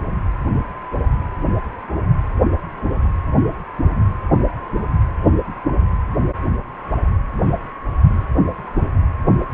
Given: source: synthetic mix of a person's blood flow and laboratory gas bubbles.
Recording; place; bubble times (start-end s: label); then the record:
Doppler ultrasound of blood flow; precordium
no bubbles
From the record:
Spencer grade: 0 (complete lack of bubble signals)